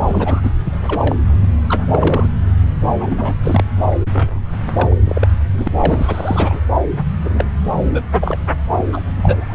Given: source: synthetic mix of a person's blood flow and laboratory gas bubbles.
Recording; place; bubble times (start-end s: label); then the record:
Doppler ultrasound of blood flow; subclavian vein
0.00-0.52 s: bubbles
0.65-0.78 s: bubbles
0.87-1.15 s: bubbles
1.41-1.49 s: bubbles
1.68-1.85 s: bubbles
1.92-2.28 s: bubbles
2.99-3.35 s: bubbles
3.43-3.63 s: bubbles
3.86-3.97 s: bubbles
4.13-4.52 s: bubbles
4.73-4.95 s: bubbles
5.06-5.28 s: bubbles
5.54-5.68 s: bubbles
5.78-6.60 s: bubbles
7.21-7.50 s: bubbles
7.93-8.02 s: bubbles
8.21-8.38 s: bubbles
8.71-8.81 s: bubbles
8.92-9.01 s: bubbles
9.22-9.45 s: bubbles
9.48-9.55 s: bubbles
From the record:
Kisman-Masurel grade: 342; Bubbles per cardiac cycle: rolling drumbeat, 9 or more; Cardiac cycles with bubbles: 100%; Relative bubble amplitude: moderate (0.250 to 0.450); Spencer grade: 3 (all of the cardiac periods contain showers or single bubble signals, but not dominating or overriding the cardiac motion signals); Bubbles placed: anywhere in the cardiac cycle